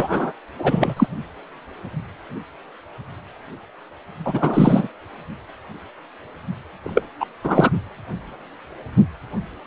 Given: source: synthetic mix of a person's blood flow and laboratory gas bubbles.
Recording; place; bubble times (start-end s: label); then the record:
Doppler ultrasound of blood flow; precordium
0.00-0.33 s: bubbles
0.59-1.07 s: bubbles
4.25-4.88 s: bubbles
6.84-7.05 s: bubbles
7.20-7.25 s: bubbles
7.44-7.71 s: bubbles
From the record:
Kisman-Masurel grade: 223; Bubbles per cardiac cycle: several, 3 to 8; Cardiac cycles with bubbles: 10 to 50%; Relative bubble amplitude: loud (0.450 to 0.775); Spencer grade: 2 (many but less than half of the cardiac periods contain bubble signals, singularly or in groups); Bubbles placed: anywhere in the cardiac cycle